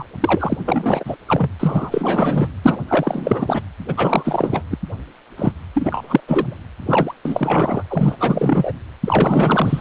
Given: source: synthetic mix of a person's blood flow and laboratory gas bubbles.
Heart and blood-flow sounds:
Doppler ultrasound of blood flow; precordium
0.00-0.05 s: bubbles
0.20-0.57 s: bubbles
0.65-1.17 s: bubbles
1.27-1.51 s: bubbles
1.59-2.52 s: bubbles
2.62-2.82 s: bubbles
2.88-3.62 s: bubbles
3.88-3.93 s: bubbles
3.96-4.62 s: bubbles
4.71-4.78 s: bubbles
5.37-5.52 s: bubbles
5.75-6.21 s: bubbles
6.27-6.60 s: bubbles
6.86-7.14 s: bubbles
7.25-7.84 s: bubbles
7.88-8.16 s: bubbles
8.20-8.72 s: bubbles
9.02-9.81 s: bubbles
From the record:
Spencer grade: 4 (maximum detectable bubble signal sounding continuously throughout systole and diastole of every cardiac period, and overriding the amplitude of the normal cardiac signals); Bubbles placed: anywhere in the cardiac cycle

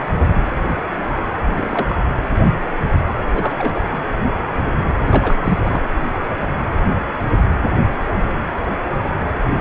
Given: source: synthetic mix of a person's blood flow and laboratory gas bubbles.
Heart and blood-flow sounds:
Doppler ultrasound of blood flow; precordium
1.43-1.96 s: bubbles
3.35-3.54 s: bubbles
3.58-3.85 s: bubbles
3.92-3.99 s: bubbles
5.02-5.38 s: bubbles
5.42-5.81 s: bubbles
From the record:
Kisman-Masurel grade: 222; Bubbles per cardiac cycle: several, 3 to 8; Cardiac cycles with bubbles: 10 to 50%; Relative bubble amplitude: moderate (0.250 to 0.450); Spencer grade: 2 (many but less than half of the cardiac periods contain bubble signals, singularly or in groups); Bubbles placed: anywhere in the cardiac cycle

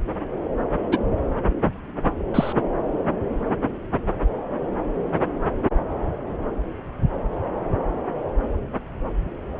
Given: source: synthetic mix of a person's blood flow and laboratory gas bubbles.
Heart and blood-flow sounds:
Doppler ultrasound of blood flow; subclavian vein
0.92-0.98 s: bubbles
2.34-2.53 s: bubbles
From the record:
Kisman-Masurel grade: 123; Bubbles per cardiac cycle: 1 to 2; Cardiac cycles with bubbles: 10 to 50%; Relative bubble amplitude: loud (0.450 to 0.775); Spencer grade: 2 (many but less than half of the cardiac periods contain bubble signals, singularly or in groups); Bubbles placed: anywhere in the cardiac cycle

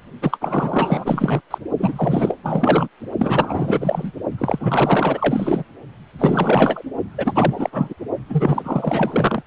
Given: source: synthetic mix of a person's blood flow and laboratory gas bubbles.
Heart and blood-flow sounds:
Doppler ultrasound of blood flow; precordium
0.22-0.38 s: bubbles
0.41-1.41 s: bubbles
1.50-1.58 s: bubbles
1.78-2.35 s: bubbles
2.43-2.88 s: bubbles
3.19-4.12 s: bubbles
4.38-5.65 s: bubbles
6.19-6.83 s: bubbles
7.17-7.70 s: bubbles
7.72-7.94 s: bubbles
8.29-9.43 s: bubbles
From the record:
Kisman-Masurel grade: 444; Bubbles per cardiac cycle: continuous sound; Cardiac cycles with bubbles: 100%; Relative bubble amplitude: maximal (0.775 to 0.999); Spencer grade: 4 (maximum detectable bubble signal sounding continuously throughout systole and diastole of every cardiac period, and overriding the amplitude of the normal cardiac signals); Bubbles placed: only in the low amplitude regions of the cardiac cycle

